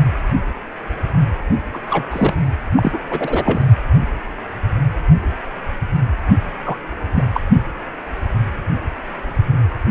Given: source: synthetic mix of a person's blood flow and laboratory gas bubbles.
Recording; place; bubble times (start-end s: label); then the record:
Doppler ultrasound of blood flow; precordium
1.73-1.80 s: bubbles
1.90-2.05 s: bubbles
2.10-2.35 s: bubbles
2.76-2.98 s: bubbles
3.10-3.66 s: bubbles
6.64-6.77 s: bubbles
7.14-7.26 s: bubbles
7.33-7.40 s: bubbles
From the record:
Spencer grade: 3 (all of the cardiac periods contain showers or single bubble signals, but not dominating or overriding the cardiac motion signals); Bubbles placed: only in the low amplitude regions of the cardiac cycle